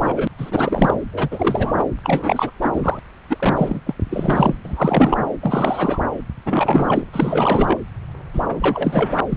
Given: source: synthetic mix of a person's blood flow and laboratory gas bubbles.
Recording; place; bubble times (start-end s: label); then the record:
Doppler ultrasound of blood flow; subclavian vein
0.00-0.27 s: bubbles
0.37-0.98 s: bubbles
1.12-1.84 s: bubbles
2.04-2.51 s: bubbles
2.61-2.69 s: bubbles
2.74-3.00 s: bubbles
3.29-3.80 s: bubbles
3.86-3.94 s: bubbles
4.10-4.54 s: bubbles
4.65-5.18 s: bubbles
5.41-5.99 s: bubbles
6.46-7.02 s: bubbles
7.12-7.79 s: bubbles
8.33-8.42 s: bubbles
8.48-9.16 s: bubbles
9.29-9.37 s: bubbles
From the record:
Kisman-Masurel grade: 343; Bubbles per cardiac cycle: rolling drumbeat, 9 or more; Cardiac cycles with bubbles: 100%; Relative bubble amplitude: loud (0.450 to 0.775); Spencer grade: 3 (all of the cardiac periods contain showers or single bubble signals, but not dominating or overriding the cardiac motion signals); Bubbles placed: anywhere in the cardiac cycle